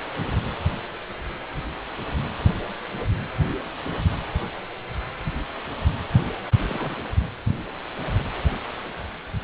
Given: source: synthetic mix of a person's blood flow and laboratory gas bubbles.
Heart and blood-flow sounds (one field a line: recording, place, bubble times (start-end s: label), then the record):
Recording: Doppler ultrasound of blood flow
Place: precordium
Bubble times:
6.70-6.95 s: bubbles
From the record:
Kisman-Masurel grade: 111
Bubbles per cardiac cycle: 1 to 2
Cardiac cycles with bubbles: 1 to 10%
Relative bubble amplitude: barely perceptible (0.100 to 0.250)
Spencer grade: 1 (occasional bubble signal discernible with the cardiac motion signal, with majority of cardiac periods free of bubbles)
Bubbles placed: anywhere in the cardiac cycle